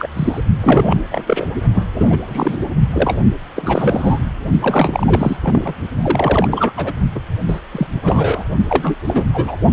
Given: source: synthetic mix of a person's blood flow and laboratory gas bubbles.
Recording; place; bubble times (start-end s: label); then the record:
Doppler ultrasound of blood flow; precordium
0.00-0.07 s: bubbles
0.14-0.41 s: bubbles
0.60-0.99 s: bubbles
1.11-1.45 s: bubbles
1.72-1.84 s: bubbles
1.94-2.18 s: bubbles
2.23-2.57 s: bubbles
2.92-3.19 s: bubbles
3.55-4.20 s: bubbles
4.62-5.37 s: bubbles
5.42-5.74 s: bubbles
6.02-6.72 s: bubbles
6.77-6.92 s: bubbles
7.15-7.20 s: bubbles
7.48-7.60 s: bubbles
7.72-7.87 s: bubbles
8.02-8.44 s: bubbles
8.69-8.97 s: bubbles
9.07-9.27 s: bubbles
9.34-9.56 s: bubbles
From the record:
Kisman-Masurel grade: 343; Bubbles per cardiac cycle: rolling drumbeat, 9 or more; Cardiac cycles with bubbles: 100%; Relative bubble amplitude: loud (0.450 to 0.775); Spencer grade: 3 (all of the cardiac periods contain showers or single bubble signals, but not dominating or overriding the cardiac motion signals); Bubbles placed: only in the low amplitude regions of the cardiac cycle